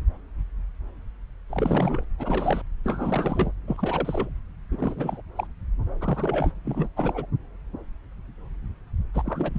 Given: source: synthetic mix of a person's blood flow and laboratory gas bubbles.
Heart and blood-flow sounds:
Doppler ultrasound of blood flow; subclavian vein
1.50-2.04 s: bubbles
2.19-2.62 s: bubbles
2.84-3.52 s: bubbles
3.67-4.29 s: bubbles
4.71-5.22 s: bubbles
5.36-5.47 s: bubbles
6.01-6.54 s: bubbles
6.65-6.89 s: bubbles
6.97-7.26 s: bubbles
9.13-9.59 s: bubbles
From the record:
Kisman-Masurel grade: 332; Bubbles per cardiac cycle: rolling drumbeat, 9 or more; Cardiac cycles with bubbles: 50 to 99%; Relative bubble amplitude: moderate (0.250 to 0.450); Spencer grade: 3 (all of the cardiac periods contain showers or single bubble signals, but not dominating or overriding the cardiac motion signals); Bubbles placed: anywhere in the cardiac cycle

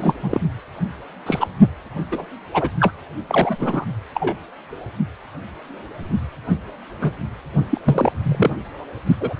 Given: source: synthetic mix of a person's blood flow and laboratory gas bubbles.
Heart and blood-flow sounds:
Doppler ultrasound of blood flow; precordium
0.00-0.14 s: bubbles
0.23-0.39 s: bubbles
1.26-1.48 s: bubbles
2.11-2.26 s: bubbles
2.53-2.69 s: bubbles
2.79-2.92 s: bubbles
3.27-3.55 s: bubbles
3.58-3.85 s: bubbles
4.14-4.37 s: bubbles
7.01-7.10 s: bubbles
7.70-7.80 s: bubbles
7.83-8.12 s: bubbles
8.22-8.55 s: bubbles
9.06-9.16 s: bubbles
9.21-9.33 s: bubbles
From the record:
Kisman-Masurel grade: 232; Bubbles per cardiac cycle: several, 3 to 8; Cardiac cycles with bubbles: 50 to 99%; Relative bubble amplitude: moderate (0.250 to 0.450); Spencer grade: 3 (all of the cardiac periods contain showers or single bubble signals, but not dominating or overriding the cardiac motion signals); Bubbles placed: only in the low amplitude regions of the cardiac cycle

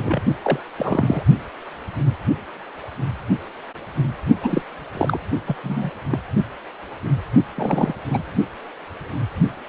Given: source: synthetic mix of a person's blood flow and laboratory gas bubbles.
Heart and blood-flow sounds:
Doppler ultrasound of blood flow; precordium
0.00-0.21 s: bubbles
0.43-0.60 s: bubbles
0.78-1.23 s: bubbles
4.42-4.62 s: bubbles
4.94-5.18 s: bubbles
5.48-5.55 s: bubbles
5.63-5.90 s: bubbles
6.12-6.19 s: bubbles
7.56-7.94 s: bubbles
8.07-8.22 s: bubbles
From the record:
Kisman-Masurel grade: 222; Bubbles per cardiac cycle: several, 3 to 8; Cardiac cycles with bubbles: 10 to 50%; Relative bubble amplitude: moderate (0.250 to 0.450); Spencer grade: 2 (many but less than half of the cardiac periods contain bubble signals, singularly or in groups); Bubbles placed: only in the low amplitude regions of the cardiac cycle

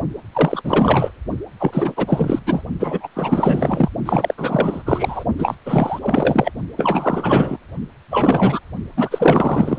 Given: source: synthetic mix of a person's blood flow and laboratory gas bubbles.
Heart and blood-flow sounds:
Doppler ultrasound of blood flow; precordium
0.33-1.11 s: bubbles
1.59-2.39 s: bubbles
2.46-2.63 s: bubbles
2.79-3.08 s: bubbles
3.15-3.89 s: bubbles
4.05-4.34 s: bubbles
4.38-4.83 s: bubbles
4.85-5.24 s: bubbles
5.38-5.55 s: bubbles
5.66-6.51 s: bubbles
6.76-7.57 s: bubbles
8.11-8.59 s: bubbles
8.96-9.79 s: bubbles
From the record:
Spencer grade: 4 (maximum detectable bubble signal sounding continuously throughout systole and diastole of every cardiac period, and overriding the amplitude of the normal cardiac signals); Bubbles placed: only in the low amplitude regions of the cardiac cycle

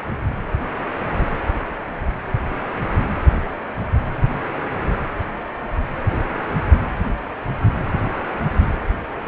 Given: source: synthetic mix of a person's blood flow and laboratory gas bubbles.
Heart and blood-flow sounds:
Doppler ultrasound of blood flow; precordium
6.11-6.19 s: bubbles
From the record:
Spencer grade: 1 (occasional bubble signal discernible with the cardiac motion signal, with majority of cardiac periods free of bubbles); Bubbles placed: anywhere in the cardiac cycle

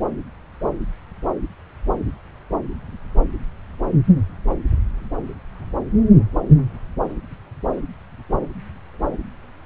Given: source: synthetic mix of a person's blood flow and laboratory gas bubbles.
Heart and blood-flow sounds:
Doppler ultrasound of blood flow; subclavian vein
no bubbles
From the record:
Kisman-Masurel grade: 000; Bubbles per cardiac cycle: 0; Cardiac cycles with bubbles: 0%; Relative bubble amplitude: no bubbles discernible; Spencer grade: 0 (complete lack of bubble signals)

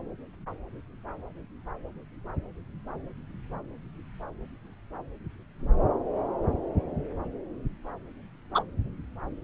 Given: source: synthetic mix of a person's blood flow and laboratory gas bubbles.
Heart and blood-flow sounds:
Doppler ultrasound of blood flow; subclavian vein
8.54-8.62 s: bubbles
From the record:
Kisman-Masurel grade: 113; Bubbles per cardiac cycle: 1 to 2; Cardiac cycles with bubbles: 1 to 10%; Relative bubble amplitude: loud (0.450 to 0.775); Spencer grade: 1 (occasional bubble signal discernible with the cardiac motion signal, with majority of cardiac periods free of bubbles); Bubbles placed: anywhere in the cardiac cycle

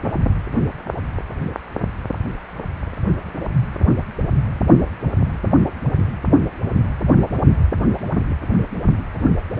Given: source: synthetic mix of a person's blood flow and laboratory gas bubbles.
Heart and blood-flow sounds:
Doppler ultrasound of blood flow; precordium
no bubbles
From the record:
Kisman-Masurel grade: 000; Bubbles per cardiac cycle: 0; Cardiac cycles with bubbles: 0%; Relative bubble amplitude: no bubbles discernible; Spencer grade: 0 (complete lack of bubble signals)

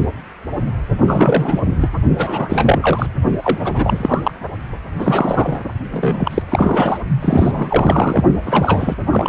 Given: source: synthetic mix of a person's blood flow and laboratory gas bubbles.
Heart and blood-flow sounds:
Doppler ultrasound of blood flow; precordium
1.07-1.59 s: bubbles
1.80-1.89 s: bubbles
2.17-3.06 s: bubbles
3.42-3.58 s: bubbles
3.65-4.32 s: bubbles
4.98-5.62 s: bubbles
5.91-6.42 s: bubbles
6.50-6.98 s: bubbles
7.21-8.24 s: bubbles
8.42-8.95 s: bubbles
9.10-9.29 s: bubbles
From the record:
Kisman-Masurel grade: 333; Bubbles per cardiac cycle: rolling drumbeat, 9 or more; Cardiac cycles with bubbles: 50 to 99%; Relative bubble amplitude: loud (0.450 to 0.775); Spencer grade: 3 (all of the cardiac periods contain showers or single bubble signals, but not dominating or overriding the cardiac motion signals); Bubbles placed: only in the low amplitude regions of the cardiac cycle

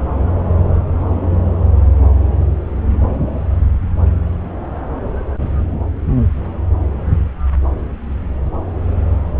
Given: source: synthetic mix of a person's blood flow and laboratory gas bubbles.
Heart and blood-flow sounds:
Doppler ultrasound of blood flow; subclavian vein
no bubbles
From the record:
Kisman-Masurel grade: 000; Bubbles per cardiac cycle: 0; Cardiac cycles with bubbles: 0%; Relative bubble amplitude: no bubbles discernible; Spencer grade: 0 (complete lack of bubble signals)

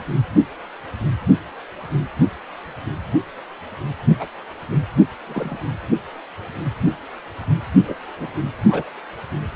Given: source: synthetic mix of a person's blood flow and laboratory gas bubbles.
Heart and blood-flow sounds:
Doppler ultrasound of blood flow; precordium
4.19-4.27 s: bubbles
5.28-5.57 s: bubbles
7.88-7.94 s: bubbles
8.18-8.28 s: bubbles
8.68-8.83 s: bubbles
From the record:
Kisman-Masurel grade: 122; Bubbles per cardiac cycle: 1 to 2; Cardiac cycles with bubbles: 10 to 50%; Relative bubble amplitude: moderate (0.250 to 0.450); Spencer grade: 2 (many but less than half of the cardiac periods contain bubble signals, singularly or in groups); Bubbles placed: anywhere in the cardiac cycle

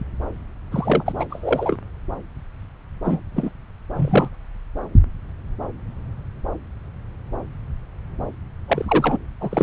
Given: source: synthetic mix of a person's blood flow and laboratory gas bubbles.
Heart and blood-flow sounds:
Doppler ultrasound of blood flow; subclavian vein
0.72-1.03 s: bubbles
1.05-1.12 s: bubbles
1.17-1.25 s: bubbles
1.30-1.77 s: bubbles
3.04-3.21 s: bubbles
3.36-3.52 s: bubbles
3.95-4.29 s: bubbles
8.67-9.17 s: bubbles
9.40-9.63 s: bubbles
From the record:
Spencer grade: 2 (many but less than half of the cardiac periods contain bubble signals, singularly or in groups); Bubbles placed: anywhere in the cardiac cycle

